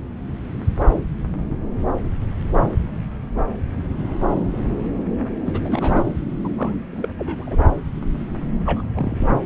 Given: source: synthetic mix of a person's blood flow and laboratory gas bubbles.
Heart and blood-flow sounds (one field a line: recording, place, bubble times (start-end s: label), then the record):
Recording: Doppler ultrasound of blood flow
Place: subclavian vein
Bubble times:
5.46-5.60 s: bubbles
5.65-6.03 s: bubbles
6.44-6.49 s: bubbles
6.58-6.76 s: bubbles
6.92-7.11 s: bubbles
7.18-7.57 s: bubbles
8.65-8.88 s: bubbles
8.93-9.28 s: bubbles
From the record:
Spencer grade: 2 (many but less than half of the cardiac periods contain bubble signals, singularly or in groups)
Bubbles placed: anywhere in the cardiac cycle